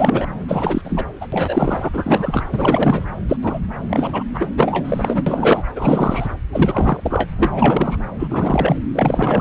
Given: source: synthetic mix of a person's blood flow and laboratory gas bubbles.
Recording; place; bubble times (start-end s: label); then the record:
Doppler ultrasound of blood flow; subclavian vein
0.00-0.27 s: bubbles
0.48-0.81 s: bubbles
0.84-1.05 s: bubbles
1.21-1.27 s: bubbles
1.32-1.89 s: bubbles
1.92-3.06 s: bubbles
3.28-3.36 s: bubbles
3.42-3.60 s: bubbles
3.89-4.23 s: bubbles
4.33-4.47 s: bubbles
4.57-5.24 s: bubbles
5.26-5.63 s: bubbles
5.75-6.28 s: bubbles
6.53-7.30 s: bubbles
7.38-7.97 s: bubbles
8.19-8.79 s: bubbles
8.93-9.41 s: bubbles
From the record:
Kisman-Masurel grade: 343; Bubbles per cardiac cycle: rolling drumbeat, 9 or more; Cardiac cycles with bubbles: 100%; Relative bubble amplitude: loud (0.450 to 0.775); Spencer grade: 3 (all of the cardiac periods contain showers or single bubble signals, but not dominating or overriding the cardiac motion signals); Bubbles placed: anywhere in the cardiac cycle